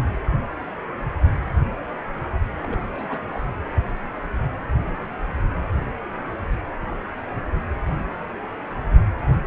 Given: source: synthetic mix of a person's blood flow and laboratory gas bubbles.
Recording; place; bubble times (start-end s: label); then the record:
Doppler ultrasound of blood flow; precordium
2.62-2.82 s: bubbles
2.88-3.19 s: bubbles
3.32-3.42 s: bubbles
From the record:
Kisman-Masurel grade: 211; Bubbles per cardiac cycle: several, 3 to 8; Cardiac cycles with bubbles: 1 to 10%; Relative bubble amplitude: barely perceptible (0.100 to 0.250); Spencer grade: 1 (occasional bubble signal discernible with the cardiac motion signal, with majority of cardiac periods free of bubbles); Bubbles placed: anywhere in the cardiac cycle